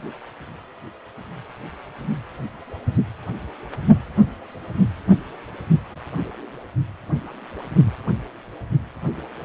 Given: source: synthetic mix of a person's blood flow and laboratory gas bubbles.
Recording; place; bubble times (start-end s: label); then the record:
Doppler ultrasound of blood flow; precordium
no bubbles
From the record:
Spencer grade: 0 (complete lack of bubble signals)